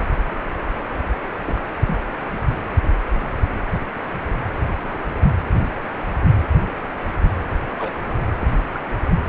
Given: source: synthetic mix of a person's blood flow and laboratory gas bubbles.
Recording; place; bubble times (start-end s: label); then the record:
Doppler ultrasound of blood flow; precordium
1.47-1.63 s: bubbles
1.88-2.00 s: bubbles
7.78-7.93 s: bubbles
8.38-8.47 s: bubbles
8.73-8.80 s: bubbles
From the record:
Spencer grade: 2 (many but less than half of the cardiac periods contain bubble signals, singularly or in groups); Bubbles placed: anywhere in the cardiac cycle